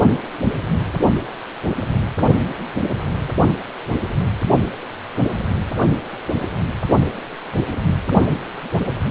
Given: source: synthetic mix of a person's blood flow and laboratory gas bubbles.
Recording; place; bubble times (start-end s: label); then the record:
Doppler ultrasound of blood flow; precordium
no bubbles
From the record:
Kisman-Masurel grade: 000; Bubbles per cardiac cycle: 0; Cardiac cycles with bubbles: 0%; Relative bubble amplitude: no bubbles discernible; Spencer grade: 0 (complete lack of bubble signals)